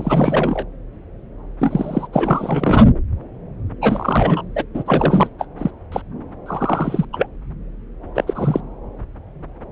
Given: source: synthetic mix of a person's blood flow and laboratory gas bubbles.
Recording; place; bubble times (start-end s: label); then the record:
Doppler ultrasound of blood flow; subclavian vein
0.00-0.66 s: bubbles
1.59-2.08 s: bubbles
2.12-2.85 s: bubbles
3.82-4.43 s: bubbles
4.55-4.64 s: bubbles
4.74-4.83 s: bubbles
4.86-5.29 s: bubbles
5.38-5.46 s: bubbles
5.58-5.71 s: bubbles
5.92-6.02 s: bubbles
6.46-7.05 s: bubbles
7.12-7.26 s: bubbles
8.15-8.24 s: bubbles
8.27-8.61 s: bubbles
From the record:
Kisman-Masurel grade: 232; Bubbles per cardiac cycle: several, 3 to 8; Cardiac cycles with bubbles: 50 to 99%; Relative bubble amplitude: moderate (0.250 to 0.450); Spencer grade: 3 (all of the cardiac periods contain showers or single bubble signals, but not dominating or overriding the cardiac motion signals); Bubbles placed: anywhere in the cardiac cycle